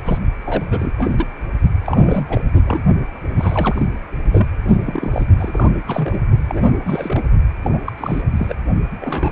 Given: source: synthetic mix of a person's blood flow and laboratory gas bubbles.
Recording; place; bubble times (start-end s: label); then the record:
Doppler ultrasound of blood flow; precordium
0.05-0.19 s: bubbles
0.46-0.93 s: bubbles
0.98-1.26 s: bubbles
1.85-2.41 s: bubbles
2.64-2.83 s: bubbles
3.36-3.86 s: bubbles
4.32-4.46 s: bubbles
4.67-4.77 s: bubbles
4.84-5.25 s: bubbles
5.39-5.71 s: bubbles
5.87-6.18 s: bubbles
6.49-7.22 s: bubbles
7.62-7.79 s: bubbles
7.84-7.92 s: bubbles
7.98-8.22 s: bubbles
8.36-8.54 s: bubbles
9.01-9.32 s: bubbles
From the record:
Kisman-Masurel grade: 342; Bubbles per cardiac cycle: rolling drumbeat, 9 or more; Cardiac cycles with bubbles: 100%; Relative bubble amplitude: moderate (0.250 to 0.450); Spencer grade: 3 (all of the cardiac periods contain showers or single bubble signals, but not dominating or overriding the cardiac motion signals); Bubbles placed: only in the low amplitude regions of the cardiac cycle